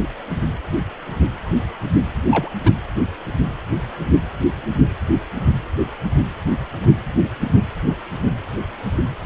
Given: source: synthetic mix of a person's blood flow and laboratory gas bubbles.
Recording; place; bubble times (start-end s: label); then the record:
Doppler ultrasound of blood flow; precordium
2.31-2.49 s: bubbles
2.64-2.73 s: bubbles
From the record:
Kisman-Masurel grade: 112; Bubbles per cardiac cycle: 1 to 2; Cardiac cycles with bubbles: 1 to 10%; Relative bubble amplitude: moderate (0.250 to 0.450); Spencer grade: 1 (occasional bubble signal discernible with the cardiac motion signal, with majority of cardiac periods free of bubbles); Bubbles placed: anywhere in the cardiac cycle